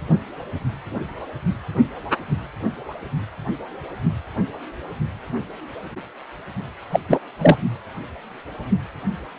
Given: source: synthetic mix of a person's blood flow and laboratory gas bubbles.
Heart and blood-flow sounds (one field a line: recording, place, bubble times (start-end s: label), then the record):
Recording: Doppler ultrasound of blood flow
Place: precordium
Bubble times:
6.91-7.00 s: bubbles
7.09-7.19 s: bubbles
7.39-7.57 s: bubbles
From the record:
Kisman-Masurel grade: 223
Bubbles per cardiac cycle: several, 3 to 8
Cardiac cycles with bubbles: 10 to 50%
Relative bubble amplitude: loud (0.450 to 0.775)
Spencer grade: 2 (many but less than half of the cardiac periods contain bubble signals, singularly or in groups)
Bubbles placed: only in the low amplitude regions of the cardiac cycle